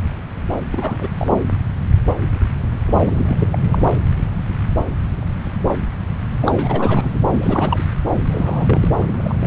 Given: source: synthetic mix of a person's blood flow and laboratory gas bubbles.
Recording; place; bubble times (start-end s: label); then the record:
Doppler ultrasound of blood flow; subclavian vein
0.71-1.08 s: bubbles
1.18-1.44 s: bubbles
2.88-3.58 s: bubbles
3.67-3.87 s: bubbles
6.41-7.18 s: bubbles
7.30-7.87 s: bubbles
8.13-8.21 s: bubbles
8.27-8.89 s: bubbles
8.97-9.47 s: bubbles
From the record:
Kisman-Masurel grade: 332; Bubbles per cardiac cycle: rolling drumbeat, 9 or more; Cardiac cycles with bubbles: 50 to 99%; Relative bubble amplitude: moderate (0.250 to 0.450); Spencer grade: 3 (all of the cardiac periods contain showers or single bubble signals, but not dominating or overriding the cardiac motion signals); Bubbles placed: anywhere in the cardiac cycle